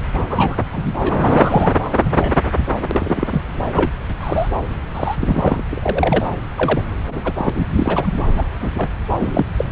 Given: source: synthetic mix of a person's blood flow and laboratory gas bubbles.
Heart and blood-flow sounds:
Doppler ultrasound of blood flow; subclavian vein
0.14-0.24 s: bubbles
0.29-0.56 s: bubbles
0.72-1.09 s: bubbles
1.21-1.74 s: bubbles
1.99-2.35 s: bubbles
2.74-2.80 s: bubbles
2.91-3.44 s: bubbles
3.72-3.91 s: bubbles
4.20-4.48 s: bubbles
4.94-5.15 s: bubbles
5.19-5.62 s: bubbles
5.71-6.29 s: bubbles
6.56-6.83 s: bubbles
7.09-7.21 s: bubbles
7.24-7.33 s: bubbles
7.38-7.50 s: bubbles
7.54-7.65 s: bubbles
7.76-8.25 s: bubbles
8.37-8.44 s: bubbles
8.61-8.68 s: bubbles
8.77-8.90 s: bubbles
9.19-9.46 s: bubbles
9.58-9.65 s: bubbles
From the record:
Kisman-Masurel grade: 242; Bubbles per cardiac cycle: several, 3 to 8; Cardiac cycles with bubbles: 100%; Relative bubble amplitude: moderate (0.250 to 0.450); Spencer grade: 3 (all of the cardiac periods contain showers or single bubble signals, but not dominating or overriding the cardiac motion signals); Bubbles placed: anywhere in the cardiac cycle

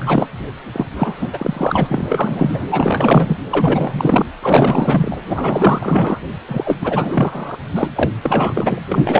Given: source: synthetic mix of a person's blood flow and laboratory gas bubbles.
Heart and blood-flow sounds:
Doppler ultrasound of blood flow; precordium
0.00-0.26 s: bubbles
0.73-0.86 s: bubbles
0.94-2.66 s: bubbles
2.71-3.36 s: bubbles
3.50-4.26 s: bubbles
4.42-5.17 s: bubbles
5.26-6.19 s: bubbles
6.47-6.76 s: bubbles
6.81-7.58 s: bubbles
7.73-7.88 s: bubbles
7.95-8.10 s: bubbles
8.23-8.82 s: bubbles
8.92-9.20 s: bubbles
From the record:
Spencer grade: 4 (maximum detectable bubble signal sounding continuously throughout systole and diastole of every cardiac period, and overriding the amplitude of the normal cardiac signals); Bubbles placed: anywhere in the cardiac cycle

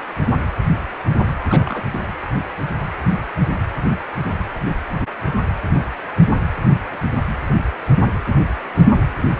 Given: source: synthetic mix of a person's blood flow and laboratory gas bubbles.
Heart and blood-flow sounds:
Doppler ultrasound of blood flow; precordium
1.49-1.83 s: bubbles
1.94-2.07 s: bubbles
From the record:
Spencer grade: 1 (occasional bubble signal discernible with the cardiac motion signal, with majority of cardiac periods free of bubbles); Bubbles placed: anywhere in the cardiac cycle

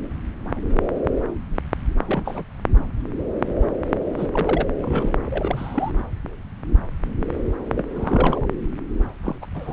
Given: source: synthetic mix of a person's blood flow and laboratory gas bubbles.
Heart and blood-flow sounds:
Doppler ultrasound of blood flow; subclavian vein
2.06-2.43 s: bubbles
4.17-4.28 s: bubbles
4.33-4.68 s: bubbles
4.83-5.14 s: bubbles
5.25-5.92 s: bubbles
7.75-7.85 s: bubbles
7.93-8.46 s: bubbles
9.23-9.36 s: bubbles
9.41-9.46 s: bubbles
9.54-9.73 s: bubbles
From the record:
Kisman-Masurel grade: 221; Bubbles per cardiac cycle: several, 3 to 8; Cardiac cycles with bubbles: 10 to 50%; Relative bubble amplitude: barely perceptible (0.100 to 0.250); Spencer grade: 2 (many but less than half of the cardiac periods contain bubble signals, singularly or in groups); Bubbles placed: anywhere in the cardiac cycle

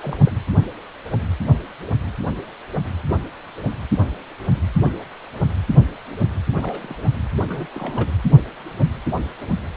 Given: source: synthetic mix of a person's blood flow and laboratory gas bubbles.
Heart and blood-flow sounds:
Doppler ultrasound of blood flow; precordium
0.02-0.16 s: bubbles
0.26-0.32 s: bubbles
6.55-6.99 s: bubbles
7.47-7.67 s: bubbles
7.75-8.08 s: bubbles
From the record:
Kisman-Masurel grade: 221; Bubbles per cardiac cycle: several, 3 to 8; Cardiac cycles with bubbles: 10 to 50%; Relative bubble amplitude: barely perceptible (0.100 to 0.250); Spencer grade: 2 (many but less than half of the cardiac periods contain bubble signals, singularly or in groups); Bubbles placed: anywhere in the cardiac cycle

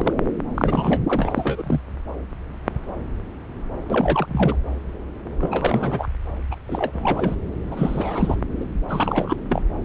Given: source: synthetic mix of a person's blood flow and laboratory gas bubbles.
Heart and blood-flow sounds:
Doppler ultrasound of blood flow; subclavian vein
0.00-0.13 s: bubbles
0.54-1.01 s: bubbles
1.09-1.81 s: bubbles
3.88-4.56 s: bubbles
5.40-6.08 s: bubbles
6.50-6.56 s: bubbles
6.67-7.36 s: bubbles
7.71-8.37 s: bubbles
8.59-8.66 s: bubbles
8.89-9.36 s: bubbles
9.49-9.62 s: bubbles
From the record:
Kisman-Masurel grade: 333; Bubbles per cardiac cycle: rolling drumbeat, 9 or more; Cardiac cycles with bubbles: 50 to 99%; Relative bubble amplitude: loud (0.450 to 0.775); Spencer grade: 3 (all of the cardiac periods contain showers or single bubble signals, but not dominating or overriding the cardiac motion signals); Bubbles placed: anywhere in the cardiac cycle

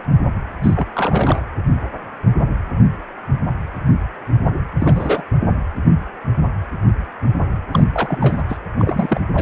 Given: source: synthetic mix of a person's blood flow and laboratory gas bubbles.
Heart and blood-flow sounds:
Doppler ultrasound of blood flow; precordium
0.62-0.86 s: bubbles
0.95-1.40 s: bubbles
4.79-5.22 s: bubbles
7.73-7.84 s: bubbles
7.92-8.43 s: bubbles
8.49-8.58 s: bubbles
8.69-9.20 s: bubbles
9.34-9.42 s: bubbles
From the record:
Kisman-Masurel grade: 222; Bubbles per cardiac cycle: several, 3 to 8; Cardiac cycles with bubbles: 10 to 50%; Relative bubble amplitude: moderate (0.250 to 0.450); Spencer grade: 2 (many but less than half of the cardiac periods contain bubble signals, singularly or in groups); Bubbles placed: anywhere in the cardiac cycle

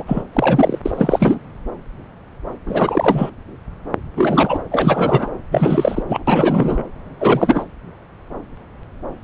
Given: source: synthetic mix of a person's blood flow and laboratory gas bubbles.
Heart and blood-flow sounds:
Doppler ultrasound of blood flow; subclavian vein
0.00-0.03 s: bubbles
0.06-0.22 s: bubbles
0.33-0.78 s: bubbles
0.85-1.39 s: bubbles
2.66-3.30 s: bubbles
4.17-4.61 s: bubbles
4.71-5.29 s: bubbles
5.51-6.03 s: bubbles
6.08-6.23 s: bubbles
6.27-6.83 s: bubbles
7.20-7.65 s: bubbles
From the record:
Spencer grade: 3 (all of the cardiac periods contain showers or single bubble signals, but not dominating or overriding the cardiac motion signals); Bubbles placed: anywhere in the cardiac cycle

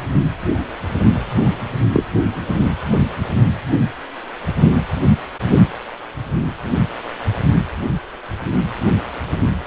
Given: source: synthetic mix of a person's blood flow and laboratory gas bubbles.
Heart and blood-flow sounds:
Doppler ultrasound of blood flow; precordium
1.93-2.03 s: bubbles
From the record:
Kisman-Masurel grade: 113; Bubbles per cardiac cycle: 1 to 2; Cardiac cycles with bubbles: 1 to 10%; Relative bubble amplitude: loud (0.450 to 0.775); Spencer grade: 1 (occasional bubble signal discernible with the cardiac motion signal, with majority of cardiac periods free of bubbles); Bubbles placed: only in the low amplitude regions of the cardiac cycle

